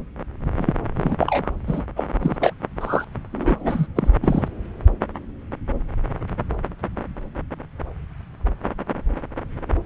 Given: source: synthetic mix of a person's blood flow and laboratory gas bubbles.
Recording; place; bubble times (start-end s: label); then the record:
Doppler ultrasound of blood flow; subclavian vein
0.57-0.72 s: bubbles
0.96-1.50 s: bubbles
1.67-1.82 s: bubbles
1.96-2.04 s: bubbles
2.21-2.36 s: bubbles
2.39-2.54 s: bubbles
2.81-3.04 s: bubbles
3.33-3.87 s: bubbles
3.96-4.11 s: bubbles
4.22-4.49 s: bubbles
From the record:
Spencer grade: 2 (many but less than half of the cardiac periods contain bubble signals, singularly or in groups); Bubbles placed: anywhere in the cardiac cycle